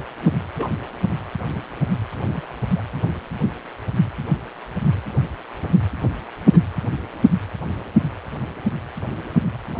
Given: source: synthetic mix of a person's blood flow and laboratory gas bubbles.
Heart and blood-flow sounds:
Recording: Doppler ultrasound of blood flow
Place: precordium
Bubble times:
0.22-0.27 s: bubbles
0.58-0.69 s: bubbles
2.28-2.45 s: bubbles
2.76-2.82 s: bubbles
6.50-6.64 s: bubbles
From the record:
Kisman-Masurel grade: 121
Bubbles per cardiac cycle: 1 to 2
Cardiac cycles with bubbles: 10 to 50%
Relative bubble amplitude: barely perceptible (0.100 to 0.250)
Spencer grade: 2 (many but less than half of the cardiac periods contain bubble signals, singularly or in groups)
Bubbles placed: anywhere in the cardiac cycle

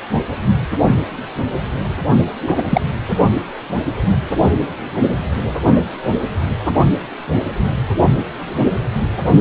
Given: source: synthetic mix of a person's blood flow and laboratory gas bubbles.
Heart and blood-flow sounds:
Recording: Doppler ultrasound of blood flow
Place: precordium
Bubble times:
2.40-2.63 s: bubbles
2.70-2.81 s: bubbles
From the record:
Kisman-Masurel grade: 213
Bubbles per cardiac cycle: several, 3 to 8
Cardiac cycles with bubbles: 1 to 10%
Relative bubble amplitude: loud (0.450 to 0.775)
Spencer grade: 1 (occasional bubble signal discernible with the cardiac motion signal, with majority of cardiac periods free of bubbles)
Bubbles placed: anywhere in the cardiac cycle

